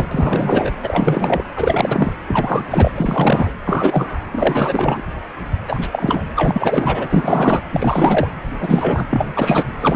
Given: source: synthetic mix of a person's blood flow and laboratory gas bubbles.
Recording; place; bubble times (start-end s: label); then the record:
Doppler ultrasound of blood flow; precordium
0.00-0.06 s: bubbles
0.11-0.72 s: bubbles
0.82-1.43 s: bubbles
1.55-2.12 s: bubbles
2.27-2.67 s: bubbles
2.71-2.92 s: bubbles
2.96-3.52 s: bubbles
3.65-4.20 s: bubbles
4.32-5.02 s: bubbles
5.68-5.88 s: bubbles
5.92-6.24 s: bubbles
6.36-7.64 s: bubbles
7.72-8.28 s: bubbles
8.60-9.04 s: bubbles
9.10-9.33 s: bubbles
9.36-9.64 s: bubbles
9.79-9.96 s: bubbles
From the record:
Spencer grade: 3 (all of the cardiac periods contain showers or single bubble signals, but not dominating or overriding the cardiac motion signals); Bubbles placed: anywhere in the cardiac cycle